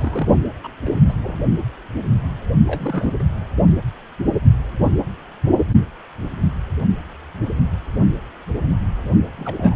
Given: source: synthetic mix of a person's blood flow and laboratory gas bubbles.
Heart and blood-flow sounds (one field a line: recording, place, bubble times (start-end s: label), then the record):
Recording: Doppler ultrasound of blood flow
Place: precordium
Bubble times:
0.00-0.28 s: bubbles
0.63-0.70 s: bubbles
0.85-0.99 s: bubbles
1.08-1.13 s: bubbles
1.23-1.35 s: bubbles
2.67-3.12 s: bubbles
3.19-3.23 s: bubbles
9.36-9.76 s: bubbles
From the record:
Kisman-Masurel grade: 221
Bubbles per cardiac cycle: several, 3 to 8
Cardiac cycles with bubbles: 10 to 50%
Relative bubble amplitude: barely perceptible (0.100 to 0.250)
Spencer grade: 2 (many but less than half of the cardiac periods contain bubble signals, singularly or in groups)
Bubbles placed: only in the low amplitude regions of the cardiac cycle